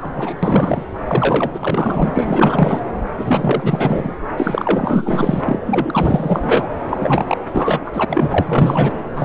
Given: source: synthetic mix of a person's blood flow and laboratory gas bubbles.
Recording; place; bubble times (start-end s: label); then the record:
Doppler ultrasound of blood flow; subclavian vein
0.01-0.35 s: bubbles
0.43-0.84 s: bubbles
1.05-1.51 s: bubbles
1.54-2.82 s: bubbles
3.17-4.14 s: bubbles
4.37-5.59 s: bubbles
5.65-6.68 s: bubbles
6.90-7.38 s: bubbles
7.51-8.05 s: bubbles
8.08-8.96 s: bubbles
9.14-9.25 s: bubbles
From the record:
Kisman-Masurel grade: 444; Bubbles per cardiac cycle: continuous sound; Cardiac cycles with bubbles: 100%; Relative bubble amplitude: maximal (0.775 to 0.999); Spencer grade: 4 (maximum detectable bubble signal sounding continuously throughout systole and diastole of every cardiac period, and overriding the amplitude of the normal cardiac signals); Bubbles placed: anywhere in the cardiac cycle